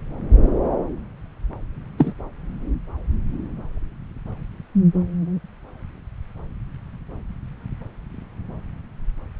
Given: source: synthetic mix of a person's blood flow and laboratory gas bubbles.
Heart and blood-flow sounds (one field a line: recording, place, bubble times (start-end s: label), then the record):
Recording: Doppler ultrasound of blood flow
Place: subclavian vein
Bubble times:
1.97-2.13 s: bubbles
From the record:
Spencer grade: 1 (occasional bubble signal discernible with the cardiac motion signal, with majority of cardiac periods free of bubbles)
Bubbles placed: anywhere in the cardiac cycle